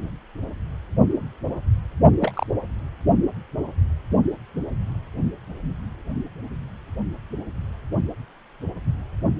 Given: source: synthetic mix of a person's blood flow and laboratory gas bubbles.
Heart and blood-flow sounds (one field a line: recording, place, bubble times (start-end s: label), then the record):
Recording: Doppler ultrasound of blood flow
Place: precordium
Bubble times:
2.20-2.46 s: bubbles
From the record:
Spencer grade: 1 (occasional bubble signal discernible with the cardiac motion signal, with majority of cardiac periods free of bubbles)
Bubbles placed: only in the low amplitude regions of the cardiac cycle